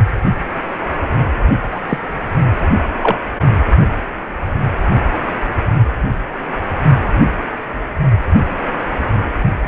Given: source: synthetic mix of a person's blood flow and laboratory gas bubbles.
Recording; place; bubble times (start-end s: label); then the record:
Doppler ultrasound of blood flow; precordium
1.72-1.80 s: bubbles
1.88-1.98 s: bubbles
3.02-3.18 s: bubbles
From the record:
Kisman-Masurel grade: 123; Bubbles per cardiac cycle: 1 to 2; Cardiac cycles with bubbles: 10 to 50%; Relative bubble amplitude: loud (0.450 to 0.775); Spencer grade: 2 (many but less than half of the cardiac periods contain bubble signals, singularly or in groups); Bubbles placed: only in the low amplitude regions of the cardiac cycle